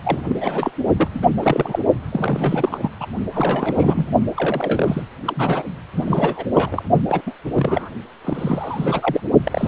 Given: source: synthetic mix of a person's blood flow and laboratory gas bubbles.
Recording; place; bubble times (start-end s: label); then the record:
Doppler ultrasound of blood flow; precordium
0.03-0.71 s: bubbles
0.97-1.08 s: bubbles
1.14-1.19 s: bubbles
1.22-1.26 s: bubbles
1.36-1.79 s: bubbles
2.11-2.90 s: bubbles
3.00-3.06 s: bubbles
3.32-4.08 s: bubbles
4.34-5.02 s: bubbles
5.25-5.63 s: bubbles
5.96-6.45 s: bubbles
6.54-6.83 s: bubbles
7.08-7.21 s: bubbles
7.26-7.32 s: bubbles
7.54-7.89 s: bubbles
8.24-9.21 s: bubbles
9.45-9.68 s: bubbles
From the record:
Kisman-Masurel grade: 332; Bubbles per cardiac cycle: rolling drumbeat, 9 or more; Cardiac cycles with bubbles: 50 to 99%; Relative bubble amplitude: moderate (0.250 to 0.450); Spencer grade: 3 (all of the cardiac periods contain showers or single bubble signals, but not dominating or overriding the cardiac motion signals); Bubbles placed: only in the low amplitude regions of the cardiac cycle